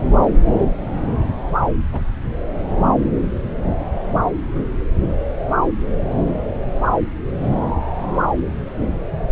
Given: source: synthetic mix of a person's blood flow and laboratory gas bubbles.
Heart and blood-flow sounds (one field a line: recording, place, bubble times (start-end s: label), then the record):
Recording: Doppler ultrasound of blood flow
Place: subclavian vein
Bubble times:
1.93-1.99 s: bubbles
From the record:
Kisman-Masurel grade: 112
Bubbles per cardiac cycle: 1 to 2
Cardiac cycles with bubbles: 1 to 10%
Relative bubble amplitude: moderate (0.250 to 0.450)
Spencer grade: 1 (occasional bubble signal discernible with the cardiac motion signal, with majority of cardiac periods free of bubbles)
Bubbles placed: anywhere in the cardiac cycle